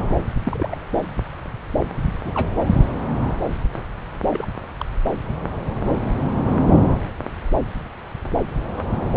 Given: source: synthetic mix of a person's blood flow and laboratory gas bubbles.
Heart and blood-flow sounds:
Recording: Doppler ultrasound of blood flow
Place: subclavian vein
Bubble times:
0.39-0.76 s: bubbles
2.24-2.32 s: bubbles
2.34-2.49 s: bubbles
4.30-4.46 s: bubbles
4.79-4.84 s: bubbles
From the record:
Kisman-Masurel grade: 121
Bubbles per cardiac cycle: 1 to 2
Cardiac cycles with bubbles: 10 to 50%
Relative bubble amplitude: barely perceptible (0.100 to 0.250)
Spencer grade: 2 (many but less than half of the cardiac periods contain bubble signals, singularly or in groups)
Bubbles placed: anywhere in the cardiac cycle

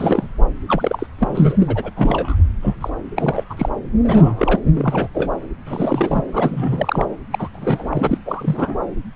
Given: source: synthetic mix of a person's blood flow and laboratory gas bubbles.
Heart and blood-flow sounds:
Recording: Doppler ultrasound of blood flow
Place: subclavian vein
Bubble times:
0.00-0.28 s: bubbles
0.68-1.06 s: bubbles
1.18-1.57 s: bubbles
1.59-1.90 s: bubbles
1.96-2.36 s: bubbles
2.62-2.75 s: bubbles
2.80-2.90 s: bubbles
3.15-3.44 s: bubbles
3.50-3.54 s: bubbles
3.57-3.69 s: bubbles
4.04-4.59 s: bubbles
4.74-5.08 s: bubbles
5.14-5.31 s: bubbles
5.66-6.22 s: bubbles
6.31-7.05 s: bubbles
7.30-7.49 s: bubbles
7.53-8.18 s: bubbles
8.26-8.76 s: bubbles
From the record:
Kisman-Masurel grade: 332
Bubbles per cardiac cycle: rolling drumbeat, 9 or more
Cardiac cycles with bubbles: 50 to 99%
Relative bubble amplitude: moderate (0.250 to 0.450)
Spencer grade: 3 (all of the cardiac periods contain showers or single bubble signals, but not dominating or overriding the cardiac motion signals)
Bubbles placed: anywhere in the cardiac cycle

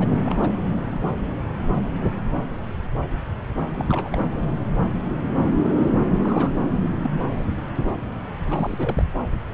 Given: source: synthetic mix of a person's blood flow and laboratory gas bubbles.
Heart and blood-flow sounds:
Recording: Doppler ultrasound of blood flow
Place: subclavian vein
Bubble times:
0.00-0.07 s: bubbles
0.13-0.21 s: bubbles
0.24-0.49 s: bubbles
3.75-4.28 s: bubbles
6.22-6.57 s: bubbles
7.03-7.09 s: bubbles
7.12-7.18 s: bubbles
7.29-7.44 s: bubbles
8.46-9.05 s: bubbles
From the record:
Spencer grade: 2 (many but less than half of the cardiac periods contain bubble signals, singularly or in groups)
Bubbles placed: anywhere in the cardiac cycle

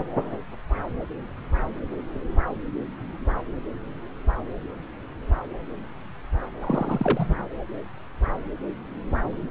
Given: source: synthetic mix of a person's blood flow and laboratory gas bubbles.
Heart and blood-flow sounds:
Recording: Doppler ultrasound of blood flow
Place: subclavian vein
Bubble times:
6.61-7.34 s: bubbles
From the record:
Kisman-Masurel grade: 212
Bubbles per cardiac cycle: several, 3 to 8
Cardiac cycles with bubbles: 1 to 10%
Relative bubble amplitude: moderate (0.250 to 0.450)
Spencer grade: 1 (occasional bubble signal discernible with the cardiac motion signal, with majority of cardiac periods free of bubbles)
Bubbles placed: anywhere in the cardiac cycle

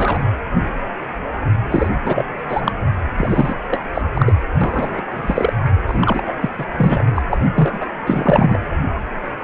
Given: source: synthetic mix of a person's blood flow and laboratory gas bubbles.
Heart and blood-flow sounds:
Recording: Doppler ultrasound of blood flow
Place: precordium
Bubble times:
0.00-0.19 s: bubbles
1.69-1.89 s: bubbles
2.04-2.26 s: bubbles
2.48-2.72 s: bubbles
3.17-3.54 s: bubbles
3.70-3.85 s: bubbles
3.93-4.01 s: bubbles
4.13-4.34 s: bubbles
4.61-5.05 s: bubbles
5.14-5.53 s: bubbles
5.88-6.34 s: bubbles
6.41-6.50 s: bubbles
6.58-6.66 s: bubbles
6.77-7.05 s: bubbles
7.15-7.22 s: bubbles
7.30-7.38 s: bubbles
7.55-7.85 s: bubbles
8.06-8.59 s: bubbles
From the record:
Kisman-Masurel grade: 333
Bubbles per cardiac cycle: rolling drumbeat, 9 or more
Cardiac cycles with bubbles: 50 to 99%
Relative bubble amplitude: loud (0.450 to 0.775)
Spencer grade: 3 (all of the cardiac periods contain showers or single bubble signals, but not dominating or overriding the cardiac motion signals)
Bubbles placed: anywhere in the cardiac cycle

